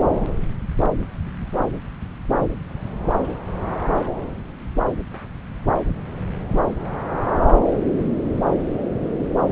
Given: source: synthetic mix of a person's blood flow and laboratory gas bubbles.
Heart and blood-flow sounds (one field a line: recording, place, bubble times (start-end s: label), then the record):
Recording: Doppler ultrasound of blood flow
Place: subclavian vein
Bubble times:
no bubbles
From the record:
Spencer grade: 0 (complete lack of bubble signals)